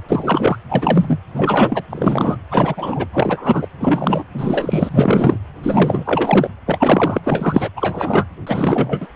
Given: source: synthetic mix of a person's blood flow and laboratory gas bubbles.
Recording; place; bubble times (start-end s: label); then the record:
Doppler ultrasound of blood flow; precordium
0.09-0.58 s: bubbles
0.69-1.18 s: bubbles
1.34-1.82 s: bubbles
1.90-2.36 s: bubbles
2.51-3.07 s: bubbles
3.13-3.67 s: bubbles
3.80-4.23 s: bubbles
4.33-5.38 s: bubbles
5.63-6.49 s: bubbles
6.66-7.20 s: bubbles
7.23-7.70 s: bubbles
7.76-8.26 s: bubbles
8.46-9.08 s: bubbles
From the record:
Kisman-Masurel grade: 333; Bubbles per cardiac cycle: rolling drumbeat, 9 or more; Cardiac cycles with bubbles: 50 to 99%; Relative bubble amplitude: loud (0.450 to 0.775); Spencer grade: 3 (all of the cardiac periods contain showers or single bubble signals, but not dominating or overriding the cardiac motion signals); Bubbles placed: anywhere in the cardiac cycle